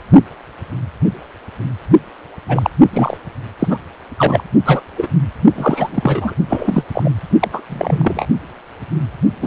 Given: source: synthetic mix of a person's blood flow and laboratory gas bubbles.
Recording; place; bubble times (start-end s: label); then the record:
Doppler ultrasound of blood flow; precordium
2.48-2.70 s: bubbles
2.92-3.17 s: bubbles
3.59-3.77 s: bubbles
4.18-4.43 s: bubbles
4.66-4.82 s: bubbles
4.98-5.08 s: bubbles
5.56-6.34 s: bubbles
6.49-6.83 s: bubbles
6.93-7.11 s: bubbles
7.40-7.48 s: bubbles
7.53-7.62 s: bubbles
7.69-8.26 s: bubbles
9.42-9.47 s: bubbles
From the record:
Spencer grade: 3 (all of the cardiac periods contain showers or single bubble signals, but not dominating or overriding the cardiac motion signals); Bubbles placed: only in the low amplitude regions of the cardiac cycle